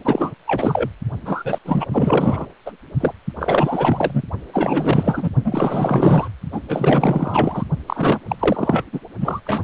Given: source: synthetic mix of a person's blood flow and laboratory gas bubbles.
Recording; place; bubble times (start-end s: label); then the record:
Doppler ultrasound of blood flow; precordium
0.05-0.32 s: bubbles
0.47-0.90 s: bubbles
1.25-1.58 s: bubbles
1.65-1.86 s: bubbles
1.91-2.47 s: bubbles
2.65-2.71 s: bubbles
3.00-3.13 s: bubbles
3.39-4.22 s: bubbles
4.53-5.30 s: bubbles
5.44-6.28 s: bubbles
6.52-6.61 s: bubbles
6.68-7.64 s: bubbles
7.87-8.20 s: bubbles
8.28-8.36 s: bubbles
8.39-8.85 s: bubbles
8.93-9.00 s: bubbles
9.21-9.40 s: bubbles
9.45-9.64 s: bubbles
From the record:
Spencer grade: 4 (maximum detectable bubble signal sounding continuously throughout systole and diastole of every cardiac period, and overriding the amplitude of the normal cardiac signals); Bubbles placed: only in the low amplitude regions of the cardiac cycle